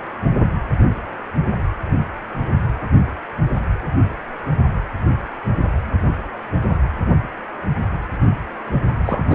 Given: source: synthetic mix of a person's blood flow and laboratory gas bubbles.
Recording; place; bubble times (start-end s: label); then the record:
Doppler ultrasound of blood flow; precordium
9.05-9.34 s: bubbles
From the record:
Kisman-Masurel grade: 212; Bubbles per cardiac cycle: several, 3 to 8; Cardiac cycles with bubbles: 1 to 10%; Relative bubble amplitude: moderate (0.250 to 0.450); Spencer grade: 1 (occasional bubble signal discernible with the cardiac motion signal, with majority of cardiac periods free of bubbles); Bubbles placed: anywhere in the cardiac cycle